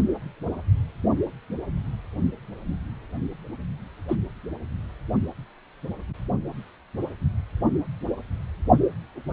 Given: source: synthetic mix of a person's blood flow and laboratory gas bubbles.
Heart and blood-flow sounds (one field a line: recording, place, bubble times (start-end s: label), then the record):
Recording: Doppler ultrasound of blood flow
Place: precordium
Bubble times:
4.08-4.17 s: bubbles
From the record:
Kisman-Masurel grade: 121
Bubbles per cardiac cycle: 1 to 2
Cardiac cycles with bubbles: 10 to 50%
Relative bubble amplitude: barely perceptible (0.100 to 0.250)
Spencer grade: 2 (many but less than half of the cardiac periods contain bubble signals, singularly or in groups)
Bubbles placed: only in the low amplitude regions of the cardiac cycle